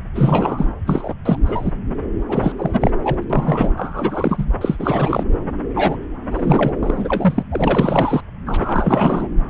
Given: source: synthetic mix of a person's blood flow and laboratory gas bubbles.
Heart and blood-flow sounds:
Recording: Doppler ultrasound of blood flow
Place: subclavian vein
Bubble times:
0.15-0.66 s: bubbles
0.86-1.15 s: bubbles
1.25-1.37 s: bubbles
1.46-1.72 s: bubbles
2.29-2.52 s: bubbles
2.57-2.91 s: bubbles
3.02-3.24 s: bubbles
3.29-3.71 s: bubbles
3.77-4.45 s: bubbles
4.61-5.23 s: bubbles
5.75-5.96 s: bubbles
6.31-6.79 s: bubbles
6.82-7.43 s: bubbles
7.51-8.23 s: bubbles
8.46-9.29 s: bubbles
From the record:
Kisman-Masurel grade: 343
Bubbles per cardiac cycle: rolling drumbeat, 9 or more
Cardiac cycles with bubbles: 100%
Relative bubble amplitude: loud (0.450 to 0.775)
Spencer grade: 3 (all of the cardiac periods contain showers or single bubble signals, but not dominating or overriding the cardiac motion signals)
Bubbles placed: anywhere in the cardiac cycle

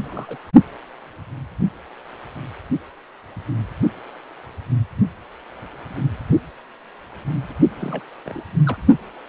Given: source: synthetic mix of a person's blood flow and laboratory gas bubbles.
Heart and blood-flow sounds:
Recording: Doppler ultrasound of blood flow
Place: precordium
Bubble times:
0.03-0.41 s: bubbles
7.75-8.02 s: bubbles
8.25-8.42 s: bubbles
8.66-8.77 s: bubbles
From the record:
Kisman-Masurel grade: 221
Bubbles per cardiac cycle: several, 3 to 8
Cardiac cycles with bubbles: 10 to 50%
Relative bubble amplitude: barely perceptible (0.100 to 0.250)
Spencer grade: 2 (many but less than half of the cardiac periods contain bubble signals, singularly or in groups)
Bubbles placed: only in the low amplitude regions of the cardiac cycle

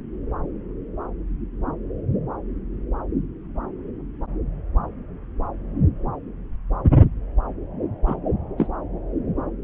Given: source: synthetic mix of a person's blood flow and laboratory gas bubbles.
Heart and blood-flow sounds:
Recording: Doppler ultrasound of blood flow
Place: subclavian vein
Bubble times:
8.06-8.16 s: bubbles
8.58-8.67 s: bubbles
From the record:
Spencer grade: 2 (many but less than half of the cardiac periods contain bubble signals, singularly or in groups)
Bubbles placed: anywhere in the cardiac cycle

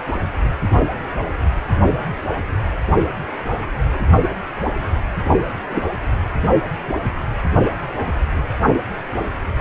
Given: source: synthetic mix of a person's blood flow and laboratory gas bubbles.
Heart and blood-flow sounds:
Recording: Doppler ultrasound of blood flow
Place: precordium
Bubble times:
5.70-5.81 s: bubbles
From the record:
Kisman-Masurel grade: 113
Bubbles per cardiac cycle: 1 to 2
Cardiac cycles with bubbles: 1 to 10%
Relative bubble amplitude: loud (0.450 to 0.775)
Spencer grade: 1 (occasional bubble signal discernible with the cardiac motion signal, with majority of cardiac periods free of bubbles)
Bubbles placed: only in the low amplitude regions of the cardiac cycle

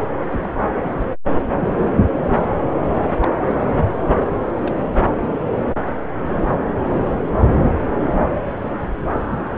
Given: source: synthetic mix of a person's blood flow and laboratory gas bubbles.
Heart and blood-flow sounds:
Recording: Doppler ultrasound of blood flow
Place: subclavian vein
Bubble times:
0.26-0.54 s: bubbles
3.23-3.29 s: bubbles
3.48-3.60 s: bubbles
4.60-4.74 s: bubbles
5.12-5.26 s: bubbles
5.35-5.39 s: bubbles
6.46-6.58 s: bubbles
7.11-7.20 s: bubbles
7.48-7.52 s: bubbles
8.65-8.75 s: bubbles
From the record:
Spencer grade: 2 (many but less than half of the cardiac periods contain bubble signals, singularly or in groups)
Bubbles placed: anywhere in the cardiac cycle

